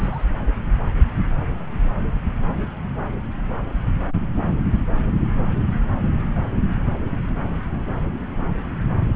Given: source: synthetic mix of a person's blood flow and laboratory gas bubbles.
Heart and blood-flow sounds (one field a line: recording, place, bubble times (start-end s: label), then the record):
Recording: Doppler ultrasound of blood flow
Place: subclavian vein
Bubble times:
0.00-0.24 s: bubbles
From the record:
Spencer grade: 1 (occasional bubble signal discernible with the cardiac motion signal, with majority of cardiac periods free of bubbles)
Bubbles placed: anywhere in the cardiac cycle